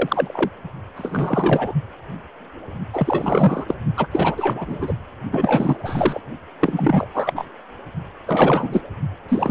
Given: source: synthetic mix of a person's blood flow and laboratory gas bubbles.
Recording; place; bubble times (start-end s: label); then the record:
Doppler ultrasound of blood flow; precordium
0.00-0.50 s: bubbles
0.96-1.74 s: bubbles
2.93-3.65 s: bubbles
3.68-3.75 s: bubbles
3.97-4.06 s: bubbles
4.11-4.93 s: bubbles
5.31-6.21 s: bubbles
6.60-7.07 s: bubbles
7.13-7.32 s: bubbles
7.35-7.44 s: bubbles
8.26-8.81 s: bubbles
9.29-9.51 s: bubbles
From the record:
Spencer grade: 3 (all of the cardiac periods contain showers or single bubble signals, but not dominating or overriding the cardiac motion signals); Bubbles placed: only in the low amplitude regions of the cardiac cycle